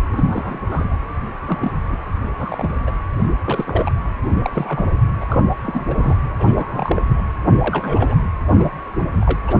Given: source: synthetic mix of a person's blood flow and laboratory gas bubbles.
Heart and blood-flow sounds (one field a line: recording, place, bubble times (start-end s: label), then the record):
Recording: Doppler ultrasound of blood flow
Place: precordium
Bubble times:
0.12-0.59 s: bubbles
0.67-0.97 s: bubbles
1.46-1.72 s: bubbles
1.89-1.98 s: bubbles
2.37-2.75 s: bubbles
2.87-2.92 s: bubbles
3.44-3.92 s: bubbles
4.44-4.86 s: bubbles
5.20-5.25 s: bubbles
5.28-5.43 s: bubbles
5.62-5.82 s: bubbles
5.85-6.17 s: bubbles
6.38-7.03 s: bubbles
7.09-7.23 s: bubbles
7.52-7.57 s: bubbles
7.61-8.20 s: bubbles
8.59-8.70 s: bubbles
8.99-9.04 s: bubbles
9.21-9.41 s: bubbles
9.47-9.57 s: bubbles
From the record:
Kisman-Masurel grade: 232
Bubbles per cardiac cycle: several, 3 to 8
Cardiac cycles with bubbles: 50 to 99%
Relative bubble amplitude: moderate (0.250 to 0.450)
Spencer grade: 3 (all of the cardiac periods contain showers or single bubble signals, but not dominating or overriding the cardiac motion signals)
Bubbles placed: anywhere in the cardiac cycle